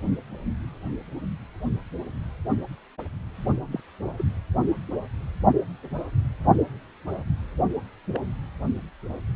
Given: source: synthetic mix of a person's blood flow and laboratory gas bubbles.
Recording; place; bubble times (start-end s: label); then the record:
Doppler ultrasound of blood flow; precordium
3.72-3.80 s: bubbles
4.17-4.25 s: bubbles
8.12-8.22 s: bubbles
From the record:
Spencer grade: 2 (many but less than half of the cardiac periods contain bubble signals, singularly or in groups); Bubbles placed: only in the low amplitude regions of the cardiac cycle